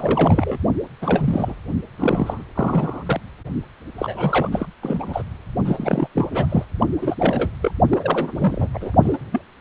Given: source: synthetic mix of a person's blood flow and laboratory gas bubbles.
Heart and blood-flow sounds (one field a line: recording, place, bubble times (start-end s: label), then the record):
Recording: Doppler ultrasound of blood flow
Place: precordium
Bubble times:
0.00-0.58 s: bubbles
1.02-1.54 s: bubbles
1.97-2.43 s: bubbles
2.55-3.20 s: bubbles
3.98-4.67 s: bubbles
4.83-5.23 s: bubbles
5.64-6.08 s: bubbles
6.15-6.28 s: bubbles
6.31-6.65 s: bubbles
6.79-6.87 s: bubbles
7.02-7.15 s: bubbles
7.19-7.49 s: bubbles
7.62-7.71 s: bubbles
7.90-8.68 s: bubbles
8.73-8.92 s: bubbles
9.02-9.19 s: bubbles
9.32-9.41 s: bubbles
From the record:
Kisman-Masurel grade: 342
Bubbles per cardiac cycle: rolling drumbeat, 9 or more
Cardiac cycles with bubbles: 100%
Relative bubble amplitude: moderate (0.250 to 0.450)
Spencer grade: 3 (all of the cardiac periods contain showers or single bubble signals, but not dominating or overriding the cardiac motion signals)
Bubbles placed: only in the low amplitude regions of the cardiac cycle